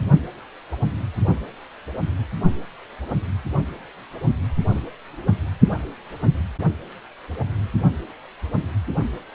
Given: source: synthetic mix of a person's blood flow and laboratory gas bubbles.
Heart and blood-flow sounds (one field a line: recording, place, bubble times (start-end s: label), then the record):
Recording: Doppler ultrasound of blood flow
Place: precordium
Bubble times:
no bubbles
From the record:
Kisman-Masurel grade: 000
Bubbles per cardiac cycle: 0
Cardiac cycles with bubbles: 0%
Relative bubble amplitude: no bubbles discernible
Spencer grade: 0 (complete lack of bubble signals)